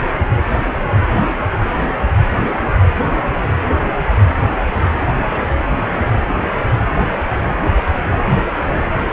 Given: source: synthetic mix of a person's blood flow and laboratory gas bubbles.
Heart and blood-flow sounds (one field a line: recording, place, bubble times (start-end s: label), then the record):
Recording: Doppler ultrasound of blood flow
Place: precordium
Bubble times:
5.65-5.74 s: bubbles
5.81-6.12 s: bubbles
From the record:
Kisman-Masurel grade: 211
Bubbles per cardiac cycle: several, 3 to 8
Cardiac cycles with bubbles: 1 to 10%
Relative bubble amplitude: barely perceptible (0.100 to 0.250)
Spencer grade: 1 (occasional bubble signal discernible with the cardiac motion signal, with majority of cardiac periods free of bubbles)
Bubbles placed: anywhere in the cardiac cycle